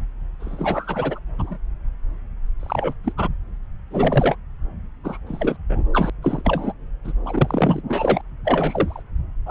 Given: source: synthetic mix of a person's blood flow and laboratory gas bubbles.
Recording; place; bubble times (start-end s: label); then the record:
Doppler ultrasound of blood flow; subclavian vein
0.40-1.19 s: bubbles
1.38-1.57 s: bubbles
2.60-2.94 s: bubbles
3.04-3.12 s: bubbles
3.17-3.28 s: bubbles
3.90-4.35 s: bubbles
5.04-5.17 s: bubbles
5.26-5.57 s: bubbles
5.69-5.83 s: bubbles
5.93-6.10 s: bubbles
6.22-6.42 s: bubbles
6.44-6.72 s: bubbles
7.04-7.12 s: bubbles
7.25-7.81 s: bubbles
7.89-8.21 s: bubbles
8.45-9.03 s: bubbles
9.46-9.51 s: bubbles
From the record:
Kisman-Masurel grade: 242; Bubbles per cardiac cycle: several, 3 to 8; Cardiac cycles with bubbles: 100%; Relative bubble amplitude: moderate (0.250 to 0.450); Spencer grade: 3 (all of the cardiac periods contain showers or single bubble signals, but not dominating or overriding the cardiac motion signals); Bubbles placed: anywhere in the cardiac cycle